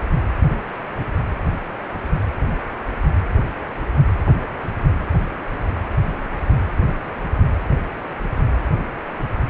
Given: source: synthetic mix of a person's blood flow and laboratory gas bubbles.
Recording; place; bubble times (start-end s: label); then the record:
Doppler ultrasound of blood flow; precordium
no bubbles
From the record:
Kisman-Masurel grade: 000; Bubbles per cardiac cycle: 0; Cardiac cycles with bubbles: 0%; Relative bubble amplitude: no bubbles discernible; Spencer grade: 0 (complete lack of bubble signals)